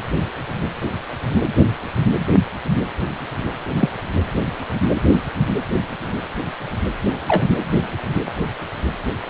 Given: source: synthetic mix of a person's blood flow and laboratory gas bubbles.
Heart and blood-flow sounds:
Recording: Doppler ultrasound of blood flow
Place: precordium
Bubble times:
3.79-3.89 s: bubbles
7.27-7.44 s: bubbles
From the record:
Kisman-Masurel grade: 122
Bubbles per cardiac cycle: 1 to 2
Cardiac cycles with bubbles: 10 to 50%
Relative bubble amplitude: moderate (0.250 to 0.450)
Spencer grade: 2 (many but less than half of the cardiac periods contain bubble signals, singularly or in groups)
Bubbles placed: anywhere in the cardiac cycle

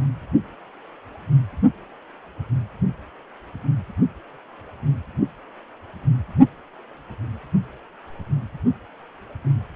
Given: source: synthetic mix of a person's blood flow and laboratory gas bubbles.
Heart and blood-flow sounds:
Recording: Doppler ultrasound of blood flow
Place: precordium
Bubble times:
no bubbles
From the record:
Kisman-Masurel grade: 000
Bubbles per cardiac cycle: 0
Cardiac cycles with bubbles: 0%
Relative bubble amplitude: no bubbles discernible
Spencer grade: 0 (complete lack of bubble signals)

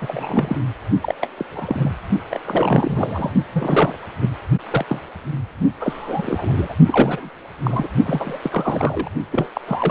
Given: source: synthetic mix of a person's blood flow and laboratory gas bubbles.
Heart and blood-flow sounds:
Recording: Doppler ultrasound of blood flow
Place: precordium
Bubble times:
0.00-0.56 s: bubbles
1.02-1.15 s: bubbles
1.20-1.29 s: bubbles
1.37-1.45 s: bubbles
1.50-1.92 s: bubbles
2.31-2.39 s: bubbles
2.45-3.32 s: bubbles
3.53-3.98 s: bubbles
4.21-4.29 s: bubbles
4.70-4.85 s: bubbles
4.88-5.00 s: bubbles
5.80-6.74 s: bubbles
6.86-7.33 s: bubbles
7.63-7.87 s: bubbles
8.06-8.38 s: bubbles
8.42-9.08 s: bubbles
9.31-9.48 s: bubbles
9.53-9.61 s: bubbles
9.67-9.91 s: bubbles
From the record:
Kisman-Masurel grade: 342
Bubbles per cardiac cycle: rolling drumbeat, 9 or more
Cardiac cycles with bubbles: 100%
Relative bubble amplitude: moderate (0.250 to 0.450)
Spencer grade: 3 (all of the cardiac periods contain showers or single bubble signals, but not dominating or overriding the cardiac motion signals)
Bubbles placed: only in the low amplitude regions of the cardiac cycle

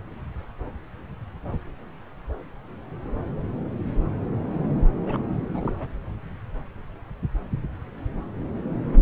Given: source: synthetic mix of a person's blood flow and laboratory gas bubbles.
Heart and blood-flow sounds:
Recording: Doppler ultrasound of blood flow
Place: subclavian vein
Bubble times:
5.01-5.21 s: bubbles
5.49-5.74 s: bubbles
5.79-5.88 s: bubbles
From the record:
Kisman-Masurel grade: 211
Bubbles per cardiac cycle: several, 3 to 8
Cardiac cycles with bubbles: 1 to 10%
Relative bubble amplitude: barely perceptible (0.100 to 0.250)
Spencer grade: 1 (occasional bubble signal discernible with the cardiac motion signal, with majority of cardiac periods free of bubbles)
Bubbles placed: anywhere in the cardiac cycle

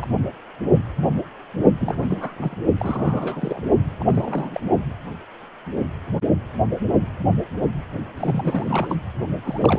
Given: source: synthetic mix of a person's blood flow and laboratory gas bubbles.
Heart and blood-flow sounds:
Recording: Doppler ultrasound of blood flow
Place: precordium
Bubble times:
0.00-0.08 s: bubbles
1.80-2.57 s: bubbles
2.77-3.60 s: bubbles
3.84-3.94 s: bubbles
3.99-4.61 s: bubbles
8.17-8.95 s: bubbles
9.43-9.79 s: bubbles
From the record:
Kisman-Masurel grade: 332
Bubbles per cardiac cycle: rolling drumbeat, 9 or more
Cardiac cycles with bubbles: 50 to 99%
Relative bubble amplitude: moderate (0.250 to 0.450)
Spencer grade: 3 (all of the cardiac periods contain showers or single bubble signals, but not dominating or overriding the cardiac motion signals)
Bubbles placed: only in the low amplitude regions of the cardiac cycle

